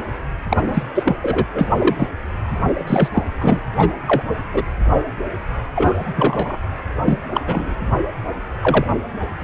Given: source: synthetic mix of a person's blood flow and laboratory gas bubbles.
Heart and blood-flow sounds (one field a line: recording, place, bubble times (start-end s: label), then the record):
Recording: Doppler ultrasound of blood flow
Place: precordium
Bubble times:
0.49-0.83 s: bubbles
0.95-1.16 s: bubbles
1.22-1.46 s: bubbles
1.54-1.69 s: bubbles
1.78-2.08 s: bubbles
2.87-3.08 s: bubbles
3.14-3.23 s: bubbles
3.41-3.60 s: bubbles
3.79-3.92 s: bubbles
4.07-4.22 s: bubbles
4.53-4.63 s: bubbles
5.75-6.12 s: bubbles
6.15-6.58 s: bubbles
7.05-7.20 s: bubbles
7.33-7.41 s: bubbles
7.46-7.73 s: bubbles
8.62-8.87 s: bubbles
9.40-9.44 s: bubbles
From the record:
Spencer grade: 3 (all of the cardiac periods contain showers or single bubble signals, but not dominating or overriding the cardiac motion signals)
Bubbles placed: anywhere in the cardiac cycle